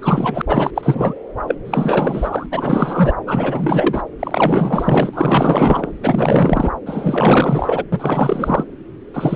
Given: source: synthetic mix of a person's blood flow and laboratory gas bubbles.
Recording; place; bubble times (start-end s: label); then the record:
Doppler ultrasound of blood flow; subclavian vein
0.02-0.41 s: bubbles
0.47-0.71 s: bubbles
0.75-1.14 s: bubbles
1.47-1.55 s: bubbles
1.65-2.46 s: bubbles
2.51-3.15 s: bubbles
3.27-4.03 s: bubbles
4.19-5.92 s: bubbles
6.01-6.71 s: bubbles
6.86-7.84 s: bubbles
7.92-8.64 s: bubbles
9.13-9.35 s: bubbles
From the record:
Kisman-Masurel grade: 444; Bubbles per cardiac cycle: continuous sound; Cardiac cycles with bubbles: 100%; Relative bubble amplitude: maximal (0.775 to 0.999); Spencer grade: 4 (maximum detectable bubble signal sounding continuously throughout systole and diastole of every cardiac period, and overriding the amplitude of the normal cardiac signals); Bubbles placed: anywhere in the cardiac cycle